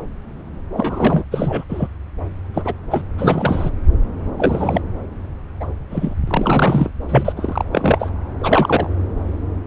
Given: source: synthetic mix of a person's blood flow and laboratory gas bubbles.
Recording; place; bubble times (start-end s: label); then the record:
Doppler ultrasound of blood flow; subclavian vein
0.73-1.25 s: bubbles
1.31-1.64 s: bubbles
1.69-1.88 s: bubbles
2.54-2.73 s: bubbles
2.90-3.03 s: bubbles
3.17-3.70 s: bubbles
4.38-4.81 s: bubbles
5.60-5.67 s: bubbles
5.91-6.15 s: bubbles
6.27-6.90 s: bubbles
7.08-7.33 s: bubbles
7.36-7.65 s: bubbles
7.72-8.10 s: bubbles
8.40-8.87 s: bubbles
From the record:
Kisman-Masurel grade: 232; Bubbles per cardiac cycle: several, 3 to 8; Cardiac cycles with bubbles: 50 to 99%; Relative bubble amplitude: moderate (0.250 to 0.450); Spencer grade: 3 (all of the cardiac periods contain showers or single bubble signals, but not dominating or overriding the cardiac motion signals); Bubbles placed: anywhere in the cardiac cycle